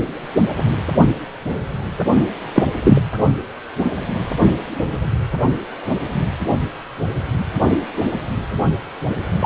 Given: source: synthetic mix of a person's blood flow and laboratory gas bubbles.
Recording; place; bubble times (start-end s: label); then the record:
Doppler ultrasound of blood flow; precordium
2.54-2.64 s: bubbles
2.84-3.01 s: bubbles
9.40-9.46 s: bubbles
From the record:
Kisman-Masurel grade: 123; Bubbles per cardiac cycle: 1 to 2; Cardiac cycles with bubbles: 10 to 50%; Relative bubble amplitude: loud (0.450 to 0.775); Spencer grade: 2 (many but less than half of the cardiac periods contain bubble signals, singularly or in groups); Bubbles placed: only in the low amplitude regions of the cardiac cycle